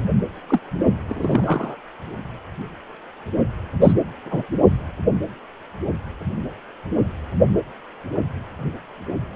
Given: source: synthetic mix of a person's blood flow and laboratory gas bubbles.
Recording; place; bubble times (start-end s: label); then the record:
Doppler ultrasound of blood flow; precordium
0.49-0.60 s: bubbles
1.08-1.76 s: bubbles
3.81-3.93 s: bubbles
4.25-4.45 s: bubbles
From the record:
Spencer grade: 2 (many but less than half of the cardiac periods contain bubble signals, singularly or in groups); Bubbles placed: only in the low amplitude regions of the cardiac cycle